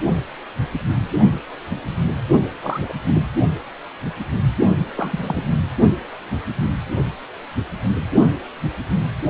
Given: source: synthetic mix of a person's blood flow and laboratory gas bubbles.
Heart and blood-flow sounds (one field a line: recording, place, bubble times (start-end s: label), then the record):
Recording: Doppler ultrasound of blood flow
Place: precordium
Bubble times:
2.61-2.79 s: bubbles
2.81-2.94 s: bubbles
3.04-3.21 s: bubbles
4.96-5.42 s: bubbles
From the record:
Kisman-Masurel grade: 222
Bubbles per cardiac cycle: several, 3 to 8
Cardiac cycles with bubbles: 10 to 50%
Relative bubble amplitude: moderate (0.250 to 0.450)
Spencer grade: 2 (many but less than half of the cardiac periods contain bubble signals, singularly or in groups)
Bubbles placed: only in the low amplitude regions of the cardiac cycle